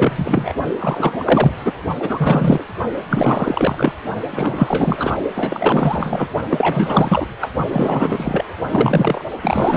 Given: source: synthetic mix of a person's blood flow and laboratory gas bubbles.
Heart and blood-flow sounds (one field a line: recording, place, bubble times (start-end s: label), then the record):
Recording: Doppler ultrasound of blood flow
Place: precordium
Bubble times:
0.00-0.53 s: bubbles
0.79-1.52 s: bubbles
1.57-1.73 s: bubbles
1.99-2.65 s: bubbles
3.09-3.92 s: bubbles
4.31-5.20 s: bubbles
5.35-6.29 s: bubbles
6.49-7.26 s: bubbles
7.41-7.49 s: bubbles
7.69-8.45 s: bubbles
8.71-9.23 s: bubbles
9.42-9.76 s: bubbles
From the record:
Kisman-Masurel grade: 444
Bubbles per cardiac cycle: continuous sound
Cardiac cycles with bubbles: 100%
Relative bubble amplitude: maximal (0.775 to 0.999)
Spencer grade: 4 (maximum detectable bubble signal sounding continuously throughout systole and diastole of every cardiac period, and overriding the amplitude of the normal cardiac signals)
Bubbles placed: only in the low amplitude regions of the cardiac cycle